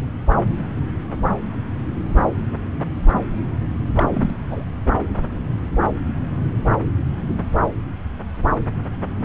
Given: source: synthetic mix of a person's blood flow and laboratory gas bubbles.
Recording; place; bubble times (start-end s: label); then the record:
Doppler ultrasound of blood flow; subclavian vein
3.97-4.30 s: bubbles
4.51-4.63 s: bubbles
From the record:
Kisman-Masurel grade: 222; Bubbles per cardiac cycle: several, 3 to 8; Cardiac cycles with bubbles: 10 to 50%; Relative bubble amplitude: moderate (0.250 to 0.450); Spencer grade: 2 (many but less than half of the cardiac periods contain bubble signals, singularly or in groups); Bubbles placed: anywhere in the cardiac cycle